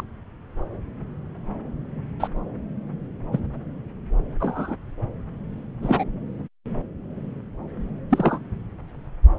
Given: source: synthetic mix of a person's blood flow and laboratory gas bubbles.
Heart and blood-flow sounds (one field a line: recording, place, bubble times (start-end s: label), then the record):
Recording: Doppler ultrasound of blood flow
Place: subclavian vein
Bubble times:
0.00-0.04 s: bubbles
2.20-2.27 s: bubbles
3.31-3.40 s: bubbles
4.40-4.76 s: bubbles
5.82-6.04 s: bubbles
8.11-8.38 s: bubbles
From the record:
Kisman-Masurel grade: 122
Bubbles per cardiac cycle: 1 to 2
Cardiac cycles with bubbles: 10 to 50%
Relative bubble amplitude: moderate (0.250 to 0.450)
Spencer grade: 2 (many but less than half of the cardiac periods contain bubble signals, singularly or in groups)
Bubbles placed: anywhere in the cardiac cycle